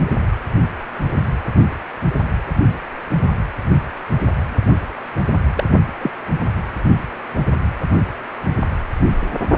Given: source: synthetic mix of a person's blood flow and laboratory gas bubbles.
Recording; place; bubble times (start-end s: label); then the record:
Doppler ultrasound of blood flow; precordium
5.55-5.64 s: bubbles
6.01-6.11 s: bubbles
From the record:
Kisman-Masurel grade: 112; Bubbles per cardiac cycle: 1 to 2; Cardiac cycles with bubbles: 1 to 10%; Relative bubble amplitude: moderate (0.250 to 0.450); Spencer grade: 1 (occasional bubble signal discernible with the cardiac motion signal, with majority of cardiac periods free of bubbles); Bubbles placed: anywhere in the cardiac cycle